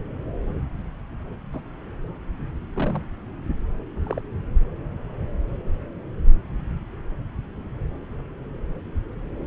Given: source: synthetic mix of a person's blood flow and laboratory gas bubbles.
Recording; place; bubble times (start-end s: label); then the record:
Doppler ultrasound of blood flow; subclavian vein
1.53-1.61 s: bubbles
2.74-3.05 s: bubbles
4.04-4.21 s: bubbles
From the record:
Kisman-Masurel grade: 121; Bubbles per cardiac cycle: 1 to 2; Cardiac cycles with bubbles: 10 to 50%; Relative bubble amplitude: barely perceptible (0.100 to 0.250); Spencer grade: 2 (many but less than half of the cardiac periods contain bubble signals, singularly or in groups); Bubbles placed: anywhere in the cardiac cycle